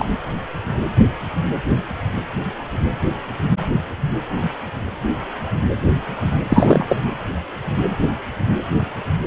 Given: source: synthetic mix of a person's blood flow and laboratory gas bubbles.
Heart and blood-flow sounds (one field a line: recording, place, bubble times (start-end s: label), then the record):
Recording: Doppler ultrasound of blood flow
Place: precordium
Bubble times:
0.00-0.05 s: bubbles
6.40-6.85 s: bubbles
6.88-6.96 s: bubbles
From the record:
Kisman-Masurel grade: 223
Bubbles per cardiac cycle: several, 3 to 8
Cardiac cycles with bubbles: 10 to 50%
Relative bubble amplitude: loud (0.450 to 0.775)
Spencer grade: 2 (many but less than half of the cardiac periods contain bubble signals, singularly or in groups)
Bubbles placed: anywhere in the cardiac cycle